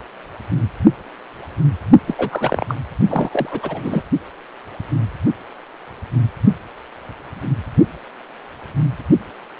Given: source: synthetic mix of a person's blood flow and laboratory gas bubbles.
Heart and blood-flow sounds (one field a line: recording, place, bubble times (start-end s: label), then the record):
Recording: Doppler ultrasound of blood flow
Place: precordium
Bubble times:
2.07-2.15 s: bubbles
2.18-2.75 s: bubbles
3.08-4.05 s: bubbles
From the record:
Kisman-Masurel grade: 222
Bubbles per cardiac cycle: several, 3 to 8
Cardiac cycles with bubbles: 10 to 50%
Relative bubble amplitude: moderate (0.250 to 0.450)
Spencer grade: 2 (many but less than half of the cardiac periods contain bubble signals, singularly or in groups)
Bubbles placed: only in the low amplitude regions of the cardiac cycle